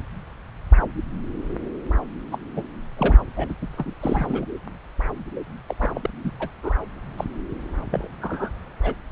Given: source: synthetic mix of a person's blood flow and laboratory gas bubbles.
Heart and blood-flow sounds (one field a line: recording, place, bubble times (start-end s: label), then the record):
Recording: Doppler ultrasound of blood flow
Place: subclavian vein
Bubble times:
2.31-2.39 s: bubbles
2.56-2.63 s: bubbles
2.97-3.18 s: bubbles
3.37-3.54 s: bubbles
3.61-3.67 s: bubbles
3.77-3.94 s: bubbles
4.01-4.44 s: bubbles
5.69-5.75 s: bubbles
5.78-6.09 s: bubbles
6.23-6.30 s: bubbles
6.39-6.50 s: bubbles
6.63-6.73 s: bubbles
7.17-7.24 s: bubbles
7.91-8.08 s: bubbles
8.21-8.49 s: bubbles
8.83-8.94 s: bubbles
From the record:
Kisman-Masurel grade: 232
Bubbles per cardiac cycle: several, 3 to 8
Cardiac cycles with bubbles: 50 to 99%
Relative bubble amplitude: moderate (0.250 to 0.450)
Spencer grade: 3 (all of the cardiac periods contain showers or single bubble signals, but not dominating or overriding the cardiac motion signals)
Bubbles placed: anywhere in the cardiac cycle